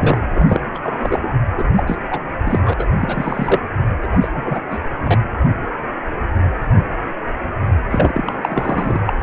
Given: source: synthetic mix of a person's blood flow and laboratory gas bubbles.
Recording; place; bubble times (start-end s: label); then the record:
Doppler ultrasound of blood flow; precordium
0.00-0.23 s: bubbles
0.32-0.60 s: bubbles
0.74-0.79 s: bubbles
0.82-1.29 s: bubbles
1.57-1.71 s: bubbles
1.76-1.84 s: bubbles
1.86-1.99 s: bubbles
2.11-2.20 s: bubbles
2.45-2.60 s: bubbles
2.65-2.73 s: bubbles
2.77-2.86 s: bubbles
2.96-3.62 s: bubbles
4.02-4.08 s: bubbles
4.12-4.17 s: bubbles
4.21-4.29 s: bubbles
4.35-4.61 s: bubbles
4.71-4.79 s: bubbles
5.01-5.18 s: bubbles
7.91-8.98 s: bubbles
9.06-9.14 s: bubbles
From the record:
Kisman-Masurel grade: 332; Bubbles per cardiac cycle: rolling drumbeat, 9 or more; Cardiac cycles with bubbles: 50 to 99%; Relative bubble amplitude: moderate (0.250 to 0.450); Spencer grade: 3 (all of the cardiac periods contain showers or single bubble signals, but not dominating or overriding the cardiac motion signals); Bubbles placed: anywhere in the cardiac cycle